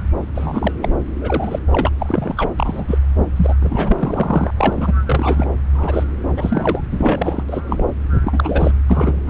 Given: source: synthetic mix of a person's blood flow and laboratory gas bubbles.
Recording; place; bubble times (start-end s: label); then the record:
Doppler ultrasound of blood flow; subclavian vein
0.35-0.72 s: bubbles
0.82-0.88 s: bubbles
1.21-1.59 s: bubbles
1.71-1.90 s: bubbles
2.00-2.50 s: bubbles
2.59-2.98 s: bubbles
3.36-3.54 s: bubbles
3.60-4.50 s: bubbles
4.57-4.92 s: bubbles
5.08-5.46 s: bubbles
5.74-6.04 s: bubbles
6.37-6.81 s: bubbles
6.92-7.43 s: bubbles
7.49-7.85 s: bubbles
8.11-8.21 s: bubbles
8.25-8.71 s: bubbles
8.89-9.20 s: bubbles
9.27-9.29 s: bubbles
From the record:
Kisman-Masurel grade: 243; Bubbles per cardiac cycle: several, 3 to 8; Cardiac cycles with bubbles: 100%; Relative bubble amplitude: loud (0.450 to 0.775); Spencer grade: 3 (all of the cardiac periods contain showers or single bubble signals, but not dominating or overriding the cardiac motion signals); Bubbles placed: anywhere in the cardiac cycle